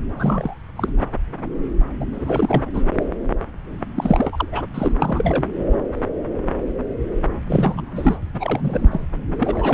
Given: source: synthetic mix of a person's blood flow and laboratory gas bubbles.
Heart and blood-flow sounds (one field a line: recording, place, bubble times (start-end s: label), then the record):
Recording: Doppler ultrasound of blood flow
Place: subclavian vein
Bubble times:
0.17-0.57 s: bubbles
0.76-0.89 s: bubbles
2.00-2.05 s: bubbles
2.12-2.62 s: bubbles
2.74-2.83 s: bubbles
3.96-4.49 s: bubbles
4.52-4.67 s: bubbles
4.74-4.92 s: bubbles
4.96-5.47 s: bubbles
7.48-8.18 s: bubbles
8.34-9.06 s: bubbles
9.39-9.74 s: bubbles
From the record:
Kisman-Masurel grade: 332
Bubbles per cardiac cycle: rolling drumbeat, 9 or more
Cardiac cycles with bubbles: 50 to 99%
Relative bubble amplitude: moderate (0.250 to 0.450)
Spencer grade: 3 (all of the cardiac periods contain showers or single bubble signals, but not dominating or overriding the cardiac motion signals)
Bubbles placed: anywhere in the cardiac cycle